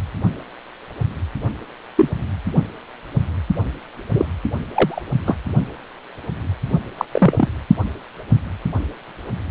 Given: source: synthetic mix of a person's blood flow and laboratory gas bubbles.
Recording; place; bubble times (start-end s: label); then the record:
Doppler ultrasound of blood flow; precordium
1.97-2.08 s: bubbles
4.14-4.25 s: bubbles
4.73-5.02 s: bubbles
5.25-5.36 s: bubbles
6.97-7.05 s: bubbles
7.11-7.48 s: bubbles
From the record:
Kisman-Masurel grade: 123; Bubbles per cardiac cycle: 1 to 2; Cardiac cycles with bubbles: 10 to 50%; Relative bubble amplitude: loud (0.450 to 0.775); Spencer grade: 2 (many but less than half of the cardiac periods contain bubble signals, singularly or in groups); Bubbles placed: only in the low amplitude regions of the cardiac cycle